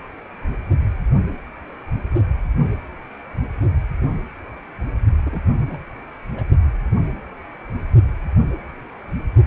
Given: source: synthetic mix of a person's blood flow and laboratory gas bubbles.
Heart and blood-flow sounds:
Doppler ultrasound of blood flow; precordium
5.25-5.41 s: bubbles
5.66-5.78 s: bubbles
6.37-6.43 s: bubbles
From the record:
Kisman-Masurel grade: 211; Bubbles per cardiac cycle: several, 3 to 8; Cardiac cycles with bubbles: 1 to 10%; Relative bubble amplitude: barely perceptible (0.100 to 0.250); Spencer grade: 1 (occasional bubble signal discernible with the cardiac motion signal, with majority of cardiac periods free of bubbles); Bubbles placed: only in the low amplitude regions of the cardiac cycle

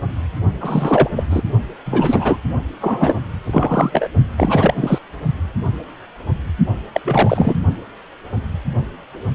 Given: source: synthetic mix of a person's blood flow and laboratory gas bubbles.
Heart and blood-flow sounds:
Doppler ultrasound of blood flow; precordium
0.60-1.09 s: bubbles
1.15-1.24 s: bubbles
1.30-1.42 s: bubbles
1.85-2.38 s: bubbles
2.80-3.17 s: bubbles
3.46-4.08 s: bubbles
4.37-4.98 s: bubbles
6.93-7.01 s: bubbles
7.04-7.58 s: bubbles
From the record:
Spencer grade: 3 (all of the cardiac periods contain showers or single bubble signals, but not dominating or overriding the cardiac motion signals); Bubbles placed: only in the low amplitude regions of the cardiac cycle

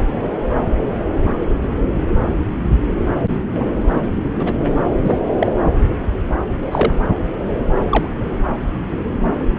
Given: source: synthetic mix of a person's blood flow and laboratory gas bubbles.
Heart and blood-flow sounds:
Doppler ultrasound of blood flow; subclavian vein
3.54-3.65 s: bubbles
4.38-4.53 s: bubbles
5.04-5.19 s: bubbles
5.41-5.52 s: bubbles
6.71-6.93 s: bubbles
7.90-8.07 s: bubbles
From the record:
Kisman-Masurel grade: 122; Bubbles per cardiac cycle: 1 to 2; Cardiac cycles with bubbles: 10 to 50%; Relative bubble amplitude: moderate (0.250 to 0.450); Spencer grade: 2 (many but less than half of the cardiac periods contain bubble signals, singularly or in groups); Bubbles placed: anywhere in the cardiac cycle

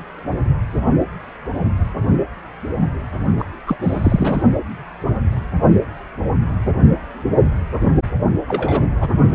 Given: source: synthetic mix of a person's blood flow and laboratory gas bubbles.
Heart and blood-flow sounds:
Doppler ultrasound of blood flow; precordium
3.39-3.46 s: bubbles
3.67-3.77 s: bubbles
3.82-4.43 s: bubbles
8.48-8.88 s: bubbles
9.00-9.09 s: bubbles
From the record:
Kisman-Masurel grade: 222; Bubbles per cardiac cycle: several, 3 to 8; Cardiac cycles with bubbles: 10 to 50%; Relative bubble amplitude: moderate (0.250 to 0.450); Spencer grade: 2 (many but less than half of the cardiac periods contain bubble signals, singularly or in groups); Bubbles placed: only in the low amplitude regions of the cardiac cycle

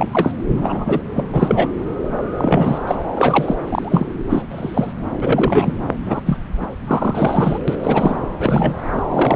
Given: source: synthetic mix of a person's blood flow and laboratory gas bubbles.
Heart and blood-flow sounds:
Doppler ultrasound of blood flow; subclavian vein
0.00-0.31 s: bubbles
0.56-1.01 s: bubbles
1.15-1.27 s: bubbles
1.32-1.70 s: bubbles
2.38-2.81 s: bubbles
2.87-2.96 s: bubbles
3.17-3.55 s: bubbles
3.68-4.06 s: bubbles
4.29-4.42 s: bubbles
4.50-4.93 s: bubbles
5.21-5.73 s: bubbles
6.05-6.21 s: bubbles
6.25-6.38 s: bubbles
6.60-6.67 s: bubbles
6.88-7.58 s: bubbles
7.67-7.78 s: bubbles
7.83-8.17 s: bubbles
8.39-8.82 s: bubbles
8.92-9.02 s: bubbles
9.12-9.36 s: bubbles
From the record:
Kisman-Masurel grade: 243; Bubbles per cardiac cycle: several, 3 to 8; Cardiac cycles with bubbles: 100%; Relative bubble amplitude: loud (0.450 to 0.775); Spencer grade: 3 (all of the cardiac periods contain showers or single bubble signals, but not dominating or overriding the cardiac motion signals); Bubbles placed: anywhere in the cardiac cycle

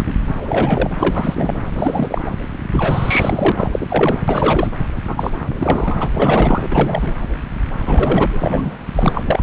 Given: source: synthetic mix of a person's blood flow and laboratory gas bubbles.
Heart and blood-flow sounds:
Doppler ultrasound of blood flow; subclavian vein
0.00-0.02 s: bubbles
0.06-0.14 s: bubbles
0.41-0.90 s: bubbles
0.98-1.56 s: bubbles
1.76-2.31 s: bubbles
2.70-3.52 s: bubbles
3.55-3.69 s: bubbles
3.72-3.87 s: bubbles
3.90-4.17 s: bubbles
4.28-4.67 s: bubbles
5.07-5.31 s: bubbles
5.60-6.08 s: bubbles
6.13-6.67 s: bubbles
6.71-7.14 s: bubbles
7.81-8.74 s: bubbles
8.96-9.43 s: bubbles
From the record:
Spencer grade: 3 (all of the cardiac periods contain showers or single bubble signals, but not dominating or overriding the cardiac motion signals); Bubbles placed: anywhere in the cardiac cycle

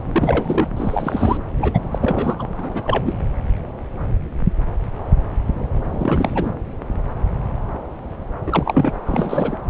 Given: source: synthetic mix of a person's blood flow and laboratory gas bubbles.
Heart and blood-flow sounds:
Doppler ultrasound of blood flow; subclavian vein
0.12-0.69 s: bubbles
0.77-1.38 s: bubbles
1.61-1.79 s: bubbles
1.92-2.36 s: bubbles
2.38-2.48 s: bubbles
2.59-3.21 s: bubbles
5.91-6.54 s: bubbles
8.46-8.92 s: bubbles
9.05-9.58 s: bubbles
From the record:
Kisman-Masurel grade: 332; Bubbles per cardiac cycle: rolling drumbeat, 9 or more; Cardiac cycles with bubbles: 50 to 99%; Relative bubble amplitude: moderate (0.250 to 0.450); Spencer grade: 3 (all of the cardiac periods contain showers or single bubble signals, but not dominating or overriding the cardiac motion signals); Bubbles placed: anywhere in the cardiac cycle

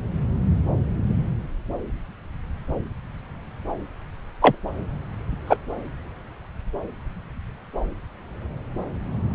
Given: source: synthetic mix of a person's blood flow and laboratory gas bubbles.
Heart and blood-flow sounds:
Doppler ultrasound of blood flow; subclavian vein
4.41-4.57 s: bubbles
5.47-5.57 s: bubbles
From the record:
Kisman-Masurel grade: 113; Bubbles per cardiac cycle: 1 to 2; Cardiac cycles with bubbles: 1 to 10%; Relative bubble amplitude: loud (0.450 to 0.775); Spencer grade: 1 (occasional bubble signal discernible with the cardiac motion signal, with majority of cardiac periods free of bubbles); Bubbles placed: anywhere in the cardiac cycle

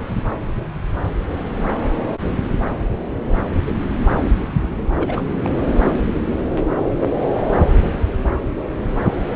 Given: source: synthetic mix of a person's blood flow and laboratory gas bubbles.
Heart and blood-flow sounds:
Doppler ultrasound of blood flow; subclavian vein
4.96-5.38 s: bubbles
5.44-5.50 s: bubbles
From the record:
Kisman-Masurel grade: 211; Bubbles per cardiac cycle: several, 3 to 8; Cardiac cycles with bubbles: 1 to 10%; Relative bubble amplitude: barely perceptible (0.100 to 0.250); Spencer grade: 1 (occasional bubble signal discernible with the cardiac motion signal, with majority of cardiac periods free of bubbles); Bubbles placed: anywhere in the cardiac cycle

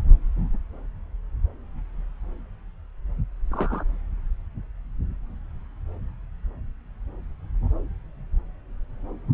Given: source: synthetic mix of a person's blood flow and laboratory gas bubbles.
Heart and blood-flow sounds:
Doppler ultrasound of blood flow; subclavian vein
3.51-3.83 s: bubbles
From the record:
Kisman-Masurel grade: 112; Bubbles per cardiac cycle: 1 to 2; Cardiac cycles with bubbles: 1 to 10%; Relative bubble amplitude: moderate (0.250 to 0.450); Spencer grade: 1 (occasional bubble signal discernible with the cardiac motion signal, with majority of cardiac periods free of bubbles); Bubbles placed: anywhere in the cardiac cycle

